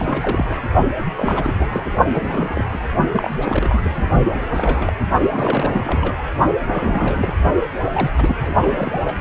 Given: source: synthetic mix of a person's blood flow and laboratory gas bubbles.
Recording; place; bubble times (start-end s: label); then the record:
Doppler ultrasound of blood flow; precordium
0.00-0.60 s: bubbles
1.15-1.54 s: bubbles
1.58-1.90 s: bubbles
2.14-2.80 s: bubbles
3.13-3.31 s: bubbles
3.42-4.08 s: bubbles
4.33-4.93 s: bubbles
5.32-6.18 s: bubbles
6.67-7.37 s: bubbles
7.85-8.10 s: bubbles
8.18-8.36 s: bubbles
8.39-8.54 s: bubbles
8.62-9.17 s: bubbles
From the record:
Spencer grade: 3 (all of the cardiac periods contain showers or single bubble signals, but not dominating or overriding the cardiac motion signals); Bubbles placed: only in the low amplitude regions of the cardiac cycle